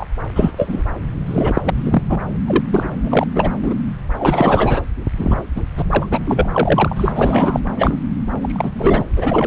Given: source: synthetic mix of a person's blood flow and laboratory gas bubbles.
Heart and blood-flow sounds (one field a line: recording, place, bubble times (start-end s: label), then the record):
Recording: Doppler ultrasound of blood flow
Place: subclavian vein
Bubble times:
0.00-0.07 s: bubbles
0.35-0.52 s: bubbles
0.56-0.83 s: bubbles
1.26-1.62 s: bubbles
1.65-1.71 s: bubbles
1.74-2.02 s: bubbles
2.08-2.19 s: bubbles
2.46-2.65 s: bubbles
2.67-2.90 s: bubbles
3.03-3.24 s: bubbles
3.35-3.50 s: bubbles
3.62-3.74 s: bubbles
4.18-4.81 s: bubbles
5.18-5.36 s: bubbles
5.55-5.62 s: bubbles
5.77-5.83 s: bubbles
5.90-6.07 s: bubbles
6.11-6.19 s: bubbles
6.25-6.48 s: bubbles
6.54-7.12 s: bubbles
7.16-7.60 s: bubbles
7.77-7.99 s: bubbles
8.41-8.70 s: bubbles
8.72-9.04 s: bubbles
9.16-9.46 s: bubbles
From the record:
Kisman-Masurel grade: 243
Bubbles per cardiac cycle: several, 3 to 8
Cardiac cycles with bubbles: 100%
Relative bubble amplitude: loud (0.450 to 0.775)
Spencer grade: 3 (all of the cardiac periods contain showers or single bubble signals, but not dominating or overriding the cardiac motion signals)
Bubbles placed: anywhere in the cardiac cycle